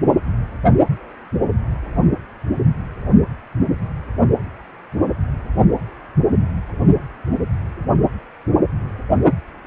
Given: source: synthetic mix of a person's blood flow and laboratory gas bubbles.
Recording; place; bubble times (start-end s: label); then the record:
Doppler ultrasound of blood flow; precordium
no bubbles
From the record:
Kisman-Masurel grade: 000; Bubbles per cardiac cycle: 0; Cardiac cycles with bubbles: 0%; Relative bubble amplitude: no bubbles discernible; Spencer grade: 0 (complete lack of bubble signals)